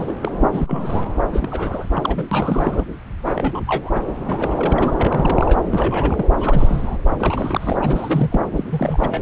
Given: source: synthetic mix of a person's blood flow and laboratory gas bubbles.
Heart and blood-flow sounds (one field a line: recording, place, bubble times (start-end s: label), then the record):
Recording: Doppler ultrasound of blood flow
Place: subclavian vein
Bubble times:
0.00-0.15 s: bubbles
0.21-0.30 s: bubbles
0.50-1.05 s: bubbles
1.32-1.92 s: bubbles
1.94-2.25 s: bubbles
2.31-2.84 s: bubbles
3.25-3.60 s: bubbles
3.67-3.91 s: bubbles
3.94-4.03 s: bubbles
4.07-4.12 s: bubbles
4.16-4.22 s: bubbles
4.27-4.92 s: bubbles
4.97-5.62 s: bubbles
5.71-6.25 s: bubbles
6.36-6.97 s: bubbles
7.19-7.76 s: bubbles
7.81-8.41 s: bubbles
8.55-8.64 s: bubbles
8.69-9.21 s: bubbles
From the record:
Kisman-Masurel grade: 342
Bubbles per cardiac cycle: rolling drumbeat, 9 or more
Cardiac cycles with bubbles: 100%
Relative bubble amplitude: moderate (0.250 to 0.450)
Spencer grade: 3 (all of the cardiac periods contain showers or single bubble signals, but not dominating or overriding the cardiac motion signals)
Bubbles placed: anywhere in the cardiac cycle